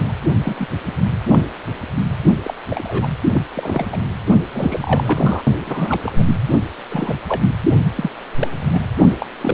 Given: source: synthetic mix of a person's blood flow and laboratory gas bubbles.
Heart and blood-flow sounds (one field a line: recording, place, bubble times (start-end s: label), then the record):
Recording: Doppler ultrasound of blood flow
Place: precordium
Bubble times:
0.00-0.12 s: bubbles
0.42-0.66 s: bubbles
1.27-1.48 s: bubbles
2.44-2.54 s: bubbles
2.70-3.10 s: bubbles
3.33-3.41 s: bubbles
3.54-3.87 s: bubbles
3.92-3.98 s: bubbles
4.53-5.42 s: bubbles
5.66-6.00 s: bubbles
6.03-6.23 s: bubbles
6.26-6.35 s: bubbles
6.89-7.14 s: bubbles
7.28-7.42 s: bubbles
7.96-8.10 s: bubbles
8.39-8.48 s: bubbles
8.62-8.83 s: bubbles
9.20-9.25 s: bubbles
9.41-9.53 s: bubbles
From the record:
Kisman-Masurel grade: 242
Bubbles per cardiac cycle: several, 3 to 8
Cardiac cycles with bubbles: 100%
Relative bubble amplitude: moderate (0.250 to 0.450)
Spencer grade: 3 (all of the cardiac periods contain showers or single bubble signals, but not dominating or overriding the cardiac motion signals)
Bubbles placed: only in the low amplitude regions of the cardiac cycle